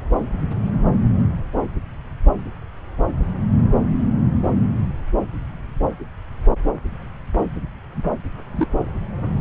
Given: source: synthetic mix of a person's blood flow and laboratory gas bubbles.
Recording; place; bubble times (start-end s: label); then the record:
Doppler ultrasound of blood flow; subclavian vein
8.51-8.67 s: bubbles
From the record:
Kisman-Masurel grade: 112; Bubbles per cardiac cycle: 1 to 2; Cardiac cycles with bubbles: 1 to 10%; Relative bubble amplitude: moderate (0.250 to 0.450); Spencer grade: 1 (occasional bubble signal discernible with the cardiac motion signal, with majority of cardiac periods free of bubbles); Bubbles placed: anywhere in the cardiac cycle